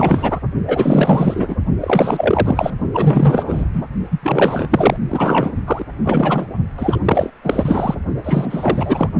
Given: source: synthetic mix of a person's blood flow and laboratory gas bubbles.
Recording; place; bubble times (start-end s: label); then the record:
Doppler ultrasound of blood flow; precordium
0.00-0.39 s: bubbles
0.68-1.55 s: bubbles
1.80-2.71 s: bubbles
2.94-3.65 s: bubbles
3.73-3.85 s: bubbles
4.10-4.18 s: bubbles
4.22-4.96 s: bubbles
5.08-5.52 s: bubbles
5.67-5.85 s: bubbles
6.04-6.46 s: bubbles
6.78-7.00 s: bubbles
7.05-7.30 s: bubbles
7.43-7.95 s: bubbles
8.24-9.09 s: bubbles
From the record:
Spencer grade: 4 (maximum detectable bubble signal sounding continuously throughout systole and diastole of every cardiac period, and overriding the amplitude of the normal cardiac signals); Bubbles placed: only in the low amplitude regions of the cardiac cycle